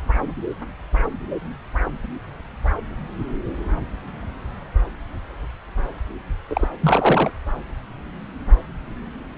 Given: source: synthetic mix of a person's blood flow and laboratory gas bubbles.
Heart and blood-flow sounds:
Doppler ultrasound of blood flow; subclavian vein
6.50-6.68 s: bubbles
6.80-7.31 s: bubbles
From the record:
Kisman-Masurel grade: 212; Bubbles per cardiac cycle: several, 3 to 8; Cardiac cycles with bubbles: 1 to 10%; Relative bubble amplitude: moderate (0.250 to 0.450); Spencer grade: 1 (occasional bubble signal discernible with the cardiac motion signal, with majority of cardiac periods free of bubbles); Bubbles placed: anywhere in the cardiac cycle

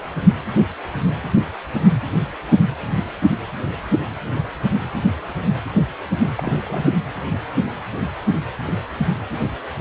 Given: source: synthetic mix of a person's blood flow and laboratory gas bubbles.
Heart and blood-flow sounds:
Doppler ultrasound of blood flow; precordium
6.37-6.89 s: bubbles
From the record:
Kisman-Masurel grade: 211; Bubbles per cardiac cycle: several, 3 to 8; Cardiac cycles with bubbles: 1 to 10%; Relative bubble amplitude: barely perceptible (0.100 to 0.250); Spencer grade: 1 (occasional bubble signal discernible with the cardiac motion signal, with majority of cardiac periods free of bubbles); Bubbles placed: anywhere in the cardiac cycle

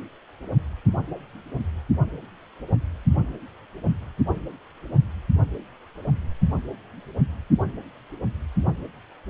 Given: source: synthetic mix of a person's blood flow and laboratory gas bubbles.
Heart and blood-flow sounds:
Doppler ultrasound of blood flow; precordium
no bubbles
From the record:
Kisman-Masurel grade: 000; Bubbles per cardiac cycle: 0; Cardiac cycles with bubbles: 0%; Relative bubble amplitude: no bubbles discernible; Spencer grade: 0 (complete lack of bubble signals)

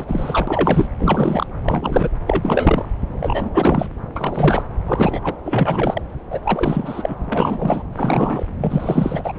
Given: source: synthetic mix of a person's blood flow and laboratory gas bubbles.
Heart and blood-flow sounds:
Doppler ultrasound of blood flow; subclavian vein
0.00-0.05 s: bubbles
0.07-0.88 s: bubbles
0.99-1.47 s: bubbles
1.64-2.10 s: bubbles
2.27-2.87 s: bubbles
3.17-3.50 s: bubbles
3.53-3.89 s: bubbles
4.16-4.63 s: bubbles
4.86-5.20 s: bubbles
5.23-5.38 s: bubbles
5.45-6.02 s: bubbles
6.30-6.39 s: bubbles
6.43-7.16 s: bubbles
7.19-7.83 s: bubbles
7.92-8.46 s: bubbles
8.61-9.33 s: bubbles
From the record:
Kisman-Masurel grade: 343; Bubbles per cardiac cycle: rolling drumbeat, 9 or more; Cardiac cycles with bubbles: 100%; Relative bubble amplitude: loud (0.450 to 0.775); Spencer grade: 3 (all of the cardiac periods contain showers or single bubble signals, but not dominating or overriding the cardiac motion signals); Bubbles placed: anywhere in the cardiac cycle

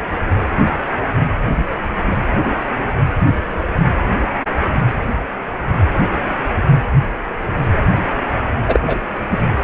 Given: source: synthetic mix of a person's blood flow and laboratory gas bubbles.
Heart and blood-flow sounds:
Doppler ultrasound of blood flow; precordium
8.67-8.79 s: bubbles
8.86-9.00 s: bubbles
9.29-9.39 s: bubbles
From the record:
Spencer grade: 1 (occasional bubble signal discernible with the cardiac motion signal, with majority of cardiac periods free of bubbles); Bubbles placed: anywhere in the cardiac cycle

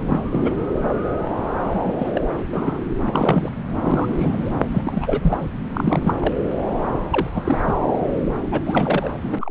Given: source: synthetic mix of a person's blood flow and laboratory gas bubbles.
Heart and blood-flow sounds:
Doppler ultrasound of blood flow; subclavian vein
0.04-0.20 s: bubbles
0.31-0.53 s: bubbles
1.72-1.92 s: bubbles
1.99-2.12 s: bubbles
2.15-2.21 s: bubbles
2.52-2.78 s: bubbles
3.02-3.50 s: bubbles
3.82-4.54 s: bubbles
4.71-5.50 s: bubbles
5.73-6.14 s: bubbles
6.20-6.33 s: bubbles
7.10-7.27 s: bubbles
7.35-7.42 s: bubbles
7.44-7.60 s: bubbles
7.67-7.76 s: bubbles
8.51-8.60 s: bubbles
8.66-9.12 s: bubbles
9.23-9.51 s: bubbles
From the record:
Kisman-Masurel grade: 232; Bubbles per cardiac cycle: several, 3 to 8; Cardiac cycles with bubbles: 50 to 99%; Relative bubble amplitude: moderate (0.250 to 0.450); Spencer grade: 3 (all of the cardiac periods contain showers or single bubble signals, but not dominating or overriding the cardiac motion signals); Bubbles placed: anywhere in the cardiac cycle

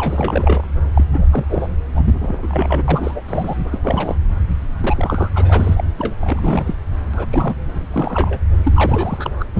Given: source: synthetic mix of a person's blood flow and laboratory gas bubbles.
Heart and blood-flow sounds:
Doppler ultrasound of blood flow; subclavian vein
0.00-0.65 s: bubbles
0.94-1.04 s: bubbles
1.10-1.25 s: bubbles
1.32-1.45 s: bubbles
1.49-1.68 s: bubbles
1.96-2.83 s: bubbles
2.88-3.21 s: bubbles
3.27-3.56 s: bubbles
3.71-3.80 s: bubbles
3.83-4.17 s: bubbles
4.83-5.29 s: bubbles
5.34-5.84 s: bubbles
5.98-6.16 s: bubbles
6.21-6.77 s: bubbles
7.13-7.26 s: bubbles
7.30-7.55 s: bubbles
7.93-8.39 s: bubbles
8.63-9.30 s: bubbles
9.39-9.45 s: bubbles
9.54-9.60 s: bubbles
From the record:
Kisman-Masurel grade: 342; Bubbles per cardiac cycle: rolling drumbeat, 9 or more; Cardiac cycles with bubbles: 100%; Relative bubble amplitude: moderate (0.250 to 0.450); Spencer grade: 3 (all of the cardiac periods contain showers or single bubble signals, but not dominating or overriding the cardiac motion signals); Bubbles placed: anywhere in the cardiac cycle

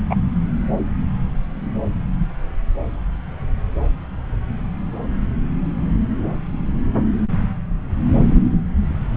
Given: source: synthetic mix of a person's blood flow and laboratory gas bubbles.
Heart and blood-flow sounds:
Doppler ultrasound of blood flow; subclavian vein
0.10-0.16 s: bubbles
From the record:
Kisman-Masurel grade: 112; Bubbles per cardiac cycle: 1 to 2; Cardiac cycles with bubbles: 1 to 10%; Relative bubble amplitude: moderate (0.250 to 0.450); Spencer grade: 1 (occasional bubble signal discernible with the cardiac motion signal, with majority of cardiac periods free of bubbles); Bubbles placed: anywhere in the cardiac cycle

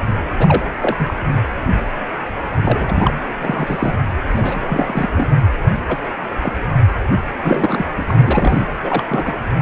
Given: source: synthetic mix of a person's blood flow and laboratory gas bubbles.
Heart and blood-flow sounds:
Doppler ultrasound of blood flow; precordium
0.39-0.65 s: bubbles
0.80-1.14 s: bubbles
2.62-3.21 s: bubbles
3.42-3.95 s: bubbles
4.31-5.07 s: bubbles
5.16-5.30 s: bubbles
5.88-5.98 s: bubbles
6.42-6.53 s: bubbles
7.42-7.87 s: bubbles
7.96-8.05 s: bubbles
8.07-8.68 s: bubbles
8.82-9.03 s: bubbles
9.08-9.40 s: bubbles
From the record:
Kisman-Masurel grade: 232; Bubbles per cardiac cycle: several, 3 to 8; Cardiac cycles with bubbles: 50 to 99%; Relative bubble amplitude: moderate (0.250 to 0.450); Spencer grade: 3 (all of the cardiac periods contain showers or single bubble signals, but not dominating or overriding the cardiac motion signals); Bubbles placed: anywhere in the cardiac cycle

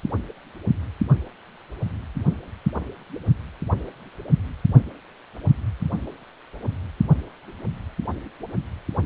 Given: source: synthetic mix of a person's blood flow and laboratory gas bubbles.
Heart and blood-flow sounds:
Doppler ultrasound of blood flow; precordium
no bubbles
From the record:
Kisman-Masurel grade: 000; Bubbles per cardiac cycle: 0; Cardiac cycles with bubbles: 0%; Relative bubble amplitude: no bubbles discernible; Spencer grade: 0 (complete lack of bubble signals)

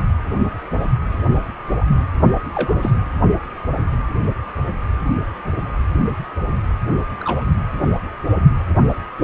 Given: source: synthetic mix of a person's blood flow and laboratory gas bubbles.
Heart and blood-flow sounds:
Doppler ultrasound of blood flow; precordium
0.70-0.91 s: bubbles
2.55-2.74 s: bubbles
2.82-2.91 s: bubbles
7.20-7.39 s: bubbles
From the record:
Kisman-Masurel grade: 122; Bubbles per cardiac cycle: 1 to 2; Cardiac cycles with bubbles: 10 to 50%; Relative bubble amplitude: moderate (0.250 to 0.450); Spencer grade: 2 (many but less than half of the cardiac periods contain bubble signals, singularly or in groups); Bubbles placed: anywhere in the cardiac cycle

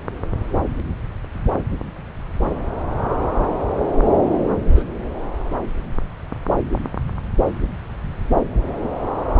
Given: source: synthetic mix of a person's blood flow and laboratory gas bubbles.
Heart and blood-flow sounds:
Doppler ultrasound of blood flow; subclavian vein
4.75-4.83 s: bubbles
From the record:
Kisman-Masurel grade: 112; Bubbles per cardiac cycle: 1 to 2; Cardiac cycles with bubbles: 1 to 10%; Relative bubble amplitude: moderate (0.250 to 0.450); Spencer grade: 1 (occasional bubble signal discernible with the cardiac motion signal, with majority of cardiac periods free of bubbles); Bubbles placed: anywhere in the cardiac cycle

